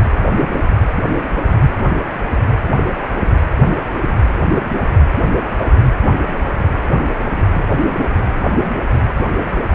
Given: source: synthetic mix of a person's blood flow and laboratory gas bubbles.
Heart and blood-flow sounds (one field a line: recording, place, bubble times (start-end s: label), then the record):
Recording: Doppler ultrasound of blood flow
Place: precordium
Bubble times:
no bubbles
From the record:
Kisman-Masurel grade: 000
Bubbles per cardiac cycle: 0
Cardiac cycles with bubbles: 0%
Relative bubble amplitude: no bubbles discernible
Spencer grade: 0 (complete lack of bubble signals)